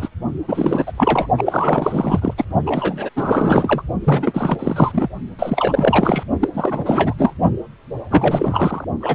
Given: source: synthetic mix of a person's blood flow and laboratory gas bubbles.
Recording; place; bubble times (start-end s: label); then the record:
Doppler ultrasound of blood flow; precordium
0.00-0.09 s: bubbles
0.48-0.93 s: bubbles
0.97-1.29 s: bubbles
1.37-2.34 s: bubbles
2.37-2.44 s: bubbles
2.66-3.09 s: bubbles
3.15-3.83 s: bubbles
4.00-5.08 s: bubbles
5.38-6.23 s: bubbles
6.40-6.50 s: bubbles
6.54-7.13 s: bubbles
7.17-7.35 s: bubbles
8.10-8.85 s: bubbles
9.00-9.15 s: bubbles
From the record:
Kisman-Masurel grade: 444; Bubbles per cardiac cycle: continuous sound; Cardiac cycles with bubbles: 100%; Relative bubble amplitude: maximal (0.775 to 0.999); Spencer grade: 4 (maximum detectable bubble signal sounding continuously throughout systole and diastole of every cardiac period, and overriding the amplitude of the normal cardiac signals); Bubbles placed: only in the low amplitude regions of the cardiac cycle